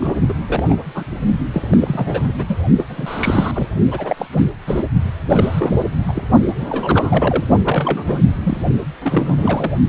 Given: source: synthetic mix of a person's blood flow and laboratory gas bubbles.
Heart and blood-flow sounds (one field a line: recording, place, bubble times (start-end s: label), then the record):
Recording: Doppler ultrasound of blood flow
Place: precordium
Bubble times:
0.00-0.15 s: bubbles
0.28-0.33 s: bubbles
0.46-0.76 s: bubbles
0.94-1.03 s: bubbles
1.53-1.68 s: bubbles
1.70-2.33 s: bubbles
2.35-2.45 s: bubbles
2.48-2.58 s: bubbles
2.77-3.52 s: bubbles
3.54-3.68 s: bubbles
3.90-4.27 s: bubbles
4.33-4.41 s: bubbles
4.67-4.84 s: bubbles
5.28-5.84 s: bubbles
5.87-6.05 s: bubbles
6.08-6.12 s: bubbles
6.15-6.27 s: bubbles
6.60-6.66 s: bubbles
6.70-7.44 s: bubbles
7.59-8.21 s: bubbles
8.43-8.58 s: bubbles
9.01-9.72 s: bubbles
From the record:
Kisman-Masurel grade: 342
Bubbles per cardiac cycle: rolling drumbeat, 9 or more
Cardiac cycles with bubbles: 100%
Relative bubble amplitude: moderate (0.250 to 0.450)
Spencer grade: 3 (all of the cardiac periods contain showers or single bubble signals, but not dominating or overriding the cardiac motion signals)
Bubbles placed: only in the low amplitude regions of the cardiac cycle